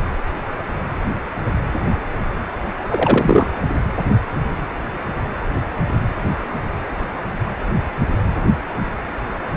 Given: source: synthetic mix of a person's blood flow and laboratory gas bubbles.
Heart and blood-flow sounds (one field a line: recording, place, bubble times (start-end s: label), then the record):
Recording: Doppler ultrasound of blood flow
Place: precordium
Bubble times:
2.88-3.50 s: bubbles
From the record:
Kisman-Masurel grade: 223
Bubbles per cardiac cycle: several, 3 to 8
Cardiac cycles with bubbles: 10 to 50%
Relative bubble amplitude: loud (0.450 to 0.775)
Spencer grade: 2 (many but less than half of the cardiac periods contain bubble signals, singularly or in groups)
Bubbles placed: anywhere in the cardiac cycle